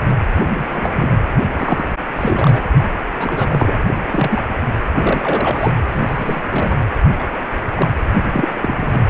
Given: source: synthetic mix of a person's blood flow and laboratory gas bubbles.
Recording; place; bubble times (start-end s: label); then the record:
Doppler ultrasound of blood flow; precordium
0.57-0.67 s: bubbles
0.71-0.92 s: bubbles
0.95-1.15 s: bubbles
1.57-1.90 s: bubbles
2.15-2.60 s: bubbles
2.76-2.85 s: bubbles
3.17-3.75 s: bubbles
3.87-3.94 s: bubbles
4.11-4.41 s: bubbles
4.93-5.71 s: bubbles
5.89-6.43 s: bubbles
6.49-6.81 s: bubbles
7.19-7.24 s: bubbles
7.75-7.88 s: bubbles
8.23-8.48 s: bubbles
8.53-9.01 s: bubbles
9.07-9.10 s: bubbles
From the record:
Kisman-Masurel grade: 232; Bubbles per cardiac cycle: several, 3 to 8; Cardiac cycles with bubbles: 50 to 99%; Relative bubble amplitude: moderate (0.250 to 0.450); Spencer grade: 3 (all of the cardiac periods contain showers or single bubble signals, but not dominating or overriding the cardiac motion signals); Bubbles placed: anywhere in the cardiac cycle